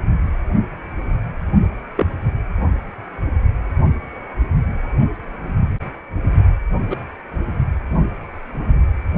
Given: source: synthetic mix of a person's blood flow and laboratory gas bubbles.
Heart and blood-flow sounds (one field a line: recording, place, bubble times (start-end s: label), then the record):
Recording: Doppler ultrasound of blood flow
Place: precordium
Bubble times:
1.96-2.06 s: bubbles
6.90-6.97 s: bubbles
From the record:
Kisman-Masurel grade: 122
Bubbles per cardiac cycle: 1 to 2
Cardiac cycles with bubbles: 10 to 50%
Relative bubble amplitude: moderate (0.250 to 0.450)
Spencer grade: 2 (many but less than half of the cardiac periods contain bubble signals, singularly or in groups)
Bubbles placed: only in the low amplitude regions of the cardiac cycle